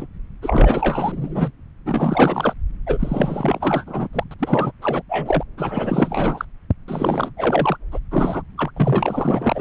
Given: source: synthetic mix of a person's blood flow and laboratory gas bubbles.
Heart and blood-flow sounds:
Doppler ultrasound of blood flow; subclavian vein
0.00-0.07 s: bubbles
0.42-1.52 s: bubbles
1.84-2.53 s: bubbles
2.86-4.08 s: bubbles
4.13-4.24 s: bubbles
4.31-4.34 s: bubbles
4.39-4.71 s: bubbles
4.81-5.02 s: bubbles
5.09-5.43 s: bubbles
5.57-6.45 s: bubbles
6.88-7.31 s: bubbles
7.37-7.77 s: bubbles
7.92-8.00 s: bubbles
8.11-8.43 s: bubbles
8.58-8.71 s: bubbles
8.76-9.61 s: bubbles
From the record:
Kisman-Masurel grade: 444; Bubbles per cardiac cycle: continuous sound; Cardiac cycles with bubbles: 100%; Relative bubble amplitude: maximal (0.775 to 0.999); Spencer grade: 4 (maximum detectable bubble signal sounding continuously throughout systole and diastole of every cardiac period, and overriding the amplitude of the normal cardiac signals); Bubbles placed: anywhere in the cardiac cycle

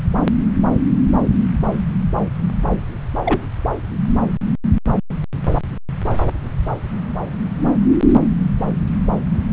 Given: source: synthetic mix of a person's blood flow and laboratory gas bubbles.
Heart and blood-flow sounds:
Doppler ultrasound of blood flow; subclavian vein
3.24-3.41 s: bubbles
From the record:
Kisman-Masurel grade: 112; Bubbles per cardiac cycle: 1 to 2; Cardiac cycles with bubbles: 1 to 10%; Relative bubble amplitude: moderate (0.250 to 0.450); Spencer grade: 1 (occasional bubble signal discernible with the cardiac motion signal, with majority of cardiac periods free of bubbles); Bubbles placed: anywhere in the cardiac cycle

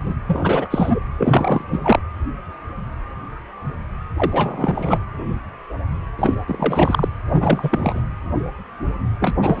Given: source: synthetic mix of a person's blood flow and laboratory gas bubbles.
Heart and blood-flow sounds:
Doppler ultrasound of blood flow; precordium
0.05-0.15 s: bubbles
0.28-0.99 s: bubbles
1.18-1.65 s: bubbles
1.72-1.80 s: bubbles
1.84-2.00 s: bubbles
4.17-5.04 s: bubbles
6.18-6.35 s: bubbles
6.46-7.08 s: bubbles
7.29-8.02 s: bubbles
9.20-9.35 s: bubbles
9.42-9.60 s: bubbles
From the record:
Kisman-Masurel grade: 333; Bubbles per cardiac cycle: rolling drumbeat, 9 or more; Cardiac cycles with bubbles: 50 to 99%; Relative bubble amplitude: loud (0.450 to 0.775); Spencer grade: 3 (all of the cardiac periods contain showers or single bubble signals, but not dominating or overriding the cardiac motion signals); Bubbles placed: anywhere in the cardiac cycle

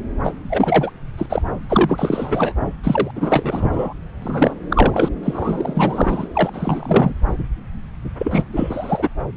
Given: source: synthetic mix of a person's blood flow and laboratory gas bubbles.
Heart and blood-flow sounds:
Doppler ultrasound of blood flow; subclavian vein
0.23-0.33 s: bubbles
0.49-0.91 s: bubbles
1.17-1.26 s: bubbles
1.29-1.42 s: bubbles
1.69-2.54 s: bubbles
2.83-3.11 s: bubbles
3.15-3.94 s: bubbles
4.22-4.54 s: bubbles
4.70-5.09 s: bubbles
5.23-6.28 s: bubbles
6.33-6.50 s: bubbles
6.53-7.24 s: bubbles
8.18-8.42 s: bubbles
8.53-9.08 s: bubbles
From the record:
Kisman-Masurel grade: 343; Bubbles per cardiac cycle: rolling drumbeat, 9 or more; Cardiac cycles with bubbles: 100%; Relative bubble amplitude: loud (0.450 to 0.775); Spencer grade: 3 (all of the cardiac periods contain showers or single bubble signals, but not dominating or overriding the cardiac motion signals); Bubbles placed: anywhere in the cardiac cycle

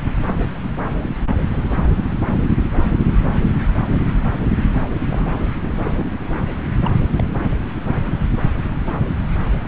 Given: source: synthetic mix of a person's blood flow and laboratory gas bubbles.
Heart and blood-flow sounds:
Doppler ultrasound of blood flow; subclavian vein
0.91-1.14 s: bubbles
5.09-5.44 s: bubbles
5.83-6.06 s: bubbles
6.84-6.92 s: bubbles
7.17-7.24 s: bubbles
8.86-8.93 s: bubbles
From the record:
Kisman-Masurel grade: 121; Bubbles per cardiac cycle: 1 to 2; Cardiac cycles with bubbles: 10 to 50%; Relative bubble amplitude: barely perceptible (0.100 to 0.250); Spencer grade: 2 (many but less than half of the cardiac periods contain bubble signals, singularly or in groups); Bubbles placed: anywhere in the cardiac cycle

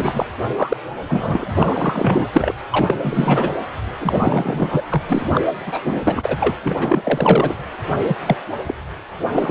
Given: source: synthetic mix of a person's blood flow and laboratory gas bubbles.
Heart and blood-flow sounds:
Doppler ultrasound of blood flow; precordium
0.00-0.26 s: bubbles
0.56-0.77 s: bubbles
1.05-1.46 s: bubbles
1.54-2.25 s: bubbles
2.33-2.54 s: bubbles
2.71-2.96 s: bubbles
3.02-3.54 s: bubbles
4.00-4.85 s: bubbles
4.89-5.02 s: bubbles
5.08-5.41 s: bubbles
5.67-6.37 s: bubbles
6.40-6.56 s: bubbles
6.64-6.77 s: bubbles
6.80-7.55 s: bubbles
8.08-8.17 s: bubbles
8.26-8.37 s: bubbles
8.66-8.74 s: bubbles
9.32-9.50 s: bubbles
From the record:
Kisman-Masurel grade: 444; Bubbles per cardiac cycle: continuous sound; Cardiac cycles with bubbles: 100%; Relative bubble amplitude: maximal (0.775 to 0.999); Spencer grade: 4 (maximum detectable bubble signal sounding continuously throughout systole and diastole of every cardiac period, and overriding the amplitude of the normal cardiac signals); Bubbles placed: anywhere in the cardiac cycle

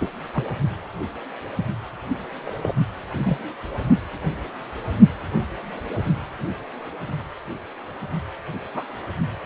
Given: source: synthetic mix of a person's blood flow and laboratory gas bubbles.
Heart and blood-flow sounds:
Doppler ultrasound of blood flow; precordium
0.00-0.10 s: bubbles
0.34-0.44 s: bubbles
2.43-2.75 s: bubbles
3.13-3.38 s: bubbles
8.74-8.83 s: bubbles
From the record:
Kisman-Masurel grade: 121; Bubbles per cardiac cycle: 1 to 2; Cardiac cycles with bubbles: 10 to 50%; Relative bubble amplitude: barely perceptible (0.100 to 0.250); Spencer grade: 2 (many but less than half of the cardiac periods contain bubble signals, singularly or in groups); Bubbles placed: only in the low amplitude regions of the cardiac cycle

